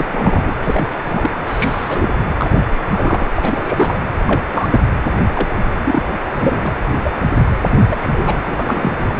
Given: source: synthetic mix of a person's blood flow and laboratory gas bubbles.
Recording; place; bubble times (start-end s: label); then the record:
Doppler ultrasound of blood flow; precordium
0.00-0.06 s: bubbles
0.11-0.53 s: bubbles
0.62-0.87 s: bubbles
1.04-1.31 s: bubbles
1.46-2.10 s: bubbles
2.37-2.68 s: bubbles
2.88-3.31 s: bubbles
3.36-3.99 s: bubbles
4.26-4.80 s: bubbles
5.35-5.54 s: bubbles
5.85-6.02 s: bubbles
6.38-6.75 s: bubbles
7.03-7.10 s: bubbles
7.71-7.77 s: bubbles
7.88-8.40 s: bubbles
8.45-9.17 s: bubbles
From the record:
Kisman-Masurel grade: 242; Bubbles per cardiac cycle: several, 3 to 8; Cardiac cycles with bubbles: 100%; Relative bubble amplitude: moderate (0.250 to 0.450); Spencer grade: 3 (all of the cardiac periods contain showers or single bubble signals, but not dominating or overriding the cardiac motion signals); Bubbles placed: anywhere in the cardiac cycle